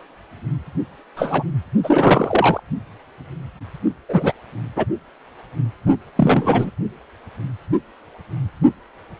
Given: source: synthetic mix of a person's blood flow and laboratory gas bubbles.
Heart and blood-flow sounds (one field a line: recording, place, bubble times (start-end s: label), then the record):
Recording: Doppler ultrasound of blood flow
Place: precordium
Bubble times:
1.16-1.43 s: bubbles
1.83-2.60 s: bubbles
4.08-4.33 s: bubbles
4.76-4.85 s: bubbles
6.16-6.71 s: bubbles
From the record:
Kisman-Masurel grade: 223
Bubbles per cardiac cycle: several, 3 to 8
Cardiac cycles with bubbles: 10 to 50%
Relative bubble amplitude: loud (0.450 to 0.775)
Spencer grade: 2 (many but less than half of the cardiac periods contain bubble signals, singularly or in groups)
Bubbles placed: only in the low amplitude regions of the cardiac cycle